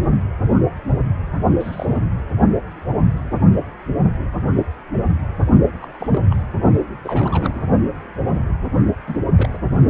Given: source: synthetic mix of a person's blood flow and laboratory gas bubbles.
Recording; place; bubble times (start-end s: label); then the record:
Doppler ultrasound of blood flow; precordium
1.59-1.86 s: bubbles
1.94-2.05 s: bubbles
5.81-6.35 s: bubbles
7.04-7.67 s: bubbles
9.07-9.16 s: bubbles
9.33-9.48 s: bubbles
9.54-9.58 s: bubbles
From the record:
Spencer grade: 2 (many but less than half of the cardiac periods contain bubble signals, singularly or in groups); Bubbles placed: only in the low amplitude regions of the cardiac cycle